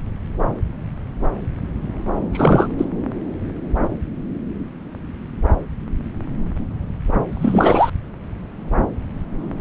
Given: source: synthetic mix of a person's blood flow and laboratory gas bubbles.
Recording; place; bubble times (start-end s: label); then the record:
Doppler ultrasound of blood flow; subclavian vein
2.32-2.68 s: bubbles
2.77-2.85 s: bubbles
7.32-7.90 s: bubbles
From the record:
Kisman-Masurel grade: 213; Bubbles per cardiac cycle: several, 3 to 8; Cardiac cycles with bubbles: 1 to 10%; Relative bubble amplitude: loud (0.450 to 0.775); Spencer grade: 1 (occasional bubble signal discernible with the cardiac motion signal, with majority of cardiac periods free of bubbles); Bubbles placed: anywhere in the cardiac cycle